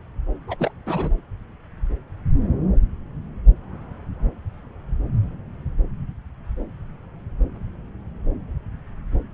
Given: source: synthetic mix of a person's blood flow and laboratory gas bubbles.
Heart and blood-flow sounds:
Doppler ultrasound of blood flow; subclavian vein
0.47-0.57 s: bubbles
0.59-0.71 s: bubbles
0.86-1.10 s: bubbles
From the record:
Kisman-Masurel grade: 212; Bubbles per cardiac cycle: several, 3 to 8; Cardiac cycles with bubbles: 1 to 10%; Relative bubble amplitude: moderate (0.250 to 0.450); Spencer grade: 1 (occasional bubble signal discernible with the cardiac motion signal, with majority of cardiac periods free of bubbles); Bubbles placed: anywhere in the cardiac cycle

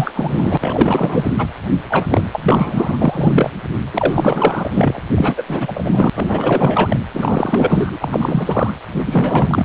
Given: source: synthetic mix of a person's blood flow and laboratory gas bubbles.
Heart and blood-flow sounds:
Doppler ultrasound of blood flow; precordium
0.00-0.57 s: bubbles
0.60-1.33 s: bubbles
1.38-1.47 s: bubbles
1.89-2.07 s: bubbles
2.10-2.23 s: bubbles
2.33-2.98 s: bubbles
3.01-3.51 s: bubbles
3.94-5.01 s: bubbles
5.15-5.43 s: bubbles
5.48-6.10 s: bubbles
6.13-7.00 s: bubbles
7.13-8.73 s: bubbles
8.97-9.65 s: bubbles
From the record:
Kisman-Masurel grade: 444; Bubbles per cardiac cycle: continuous sound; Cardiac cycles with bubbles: 100%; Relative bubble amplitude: maximal (0.775 to 0.999); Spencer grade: 4 (maximum detectable bubble signal sounding continuously throughout systole and diastole of every cardiac period, and overriding the amplitude of the normal cardiac signals); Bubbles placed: anywhere in the cardiac cycle

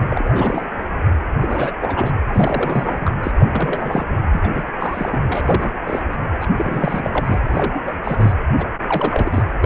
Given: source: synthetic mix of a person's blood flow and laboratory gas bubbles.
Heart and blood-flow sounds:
Doppler ultrasound of blood flow; precordium
0.00-0.07 s: bubbles
0.10-0.67 s: bubbles
1.41-1.71 s: bubbles
1.80-2.12 s: bubbles
2.27-3.12 s: bubbles
3.23-3.31 s: bubbles
3.40-4.07 s: bubbles
4.33-4.48 s: bubbles
4.53-4.62 s: bubbles
4.79-5.19 s: bubbles
5.28-5.70 s: bubbles
5.86-6.02 s: bubbles
6.09-6.17 s: bubbles
6.40-6.48 s: bubbles
6.58-7.41 s: bubbles
7.47-7.81 s: bubbles
7.86-7.96 s: bubbles
8.04-8.33 s: bubbles
8.58-8.66 s: bubbles
8.81-9.46 s: bubbles
9.60-9.66 s: bubbles
From the record:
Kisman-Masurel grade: 342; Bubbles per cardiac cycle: rolling drumbeat, 9 or more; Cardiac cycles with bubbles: 100%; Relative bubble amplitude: moderate (0.250 to 0.450); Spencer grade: 3 (all of the cardiac periods contain showers or single bubble signals, but not dominating or overriding the cardiac motion signals); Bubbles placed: anywhere in the cardiac cycle

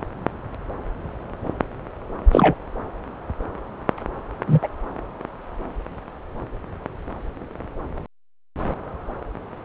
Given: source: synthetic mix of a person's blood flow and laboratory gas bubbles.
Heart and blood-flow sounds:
Doppler ultrasound of blood flow; subclavian vein
2.32-2.54 s: bubbles
4.47-4.59 s: bubbles
4.62-4.68 s: bubbles
From the record:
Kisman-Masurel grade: 123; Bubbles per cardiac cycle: 1 to 2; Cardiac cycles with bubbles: 10 to 50%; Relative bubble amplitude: loud (0.450 to 0.775); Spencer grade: 2 (many but less than half of the cardiac periods contain bubble signals, singularly or in groups); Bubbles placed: anywhere in the cardiac cycle

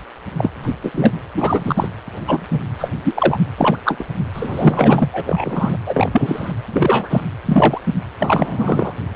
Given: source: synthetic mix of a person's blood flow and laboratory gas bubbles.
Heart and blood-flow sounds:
Doppler ultrasound of blood flow; precordium
0.00-0.02 s: bubbles
0.38-0.50 s: bubbles
0.62-0.75 s: bubbles
0.83-0.91 s: bubbles
0.94-1.13 s: bubbles
1.36-1.91 s: bubbles
2.27-2.46 s: bubbles
2.52-2.59 s: bubbles
2.79-2.91 s: bubbles
3.04-3.39 s: bubbles
3.57-3.77 s: bubbles
3.84-4.04 s: bubbles
4.34-5.09 s: bubbles
5.11-5.76 s: bubbles
5.86-6.52 s: bubbles
6.71-7.21 s: bubbles
7.46-7.81 s: bubbles
7.86-7.92 s: bubbles
8.18-8.93 s: bubbles
From the record:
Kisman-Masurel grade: 243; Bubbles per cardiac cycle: several, 3 to 8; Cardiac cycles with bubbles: 100%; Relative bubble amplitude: loud (0.450 to 0.775); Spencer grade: 3 (all of the cardiac periods contain showers or single bubble signals, but not dominating or overriding the cardiac motion signals); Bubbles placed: anywhere in the cardiac cycle

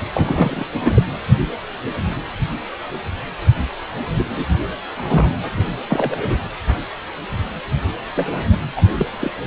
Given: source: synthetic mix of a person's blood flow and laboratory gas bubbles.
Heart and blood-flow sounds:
Doppler ultrasound of blood flow; precordium
0.13-0.71 s: bubbles
0.80-1.02 s: bubbles
4.17-4.58 s: bubbles
4.96-5.35 s: bubbles
5.88-6.37 s: bubbles
8.15-8.47 s: bubbles
8.50-8.58 s: bubbles
8.75-8.82 s: bubbles
8.99-9.06 s: bubbles
9.19-9.33 s: bubbles
From the record:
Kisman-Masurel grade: 232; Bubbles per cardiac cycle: several, 3 to 8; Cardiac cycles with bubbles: 50 to 99%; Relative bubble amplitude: moderate (0.250 to 0.450); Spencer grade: 3 (all of the cardiac periods contain showers or single bubble signals, but not dominating or overriding the cardiac motion signals); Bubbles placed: anywhere in the cardiac cycle

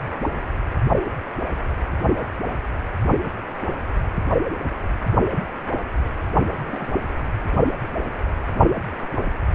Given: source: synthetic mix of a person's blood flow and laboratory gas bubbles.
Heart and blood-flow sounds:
Doppler ultrasound of blood flow; precordium
6.66-6.88 s: bubbles
From the record:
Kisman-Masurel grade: 111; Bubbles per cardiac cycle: 1 to 2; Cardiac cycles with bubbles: 1 to 10%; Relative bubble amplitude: barely perceptible (0.100 to 0.250); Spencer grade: 1 (occasional bubble signal discernible with the cardiac motion signal, with majority of cardiac periods free of bubbles); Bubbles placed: only in the low amplitude regions of the cardiac cycle

